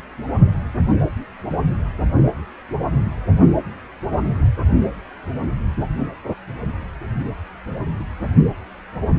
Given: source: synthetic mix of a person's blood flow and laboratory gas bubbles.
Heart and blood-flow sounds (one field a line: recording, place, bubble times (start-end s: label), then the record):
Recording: Doppler ultrasound of blood flow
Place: precordium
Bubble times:
no bubbles
From the record:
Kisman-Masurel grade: 000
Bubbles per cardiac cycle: 0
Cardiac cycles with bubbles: 0%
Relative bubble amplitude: no bubbles discernible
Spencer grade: 0 (complete lack of bubble signals)